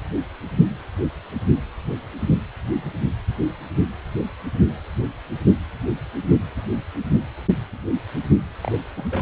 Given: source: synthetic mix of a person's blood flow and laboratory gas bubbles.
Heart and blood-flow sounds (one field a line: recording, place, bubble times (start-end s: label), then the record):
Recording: Doppler ultrasound of blood flow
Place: precordium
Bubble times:
8.62-8.71 s: bubbles
8.96-9.03 s: bubbles
9.11-9.22 s: bubbles
From the record:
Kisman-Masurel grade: 221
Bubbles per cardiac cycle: several, 3 to 8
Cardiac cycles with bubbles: 10 to 50%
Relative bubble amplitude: barely perceptible (0.100 to 0.250)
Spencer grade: 2 (many but less than half of the cardiac periods contain bubble signals, singularly or in groups)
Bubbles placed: anywhere in the cardiac cycle